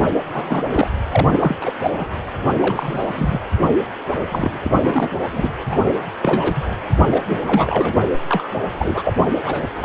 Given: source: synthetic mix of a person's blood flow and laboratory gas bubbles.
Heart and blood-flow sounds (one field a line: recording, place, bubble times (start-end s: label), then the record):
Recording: Doppler ultrasound of blood flow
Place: precordium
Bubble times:
0.00-0.03 s: bubbles
0.32-0.63 s: bubbles
0.71-0.90 s: bubbles
1.11-1.26 s: bubbles
1.30-1.56 s: bubbles
1.61-1.72 s: bubbles
1.82-1.91 s: bubbles
1.97-2.07 s: bubbles
2.49-2.53 s: bubbles
2.60-3.07 s: bubbles
3.10-3.40 s: bubbles
3.62-3.70 s: bubbles
4.08-4.51 s: bubbles
4.62-5.08 s: bubbles
5.32-5.48 s: bubbles
5.64-5.79 s: bubbles
6.22-6.62 s: bubbles
7.10-7.24 s: bubbles
7.29-8.03 s: bubbles
8.28-8.49 s: bubbles
8.79-9.13 s: bubbles
9.44-9.66 s: bubbles
9.80-9.85 s: bubbles
From the record:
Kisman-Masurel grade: 242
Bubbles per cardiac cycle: several, 3 to 8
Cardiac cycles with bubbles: 100%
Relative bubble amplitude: moderate (0.250 to 0.450)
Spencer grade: 3 (all of the cardiac periods contain showers or single bubble signals, but not dominating or overriding the cardiac motion signals)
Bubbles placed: anywhere in the cardiac cycle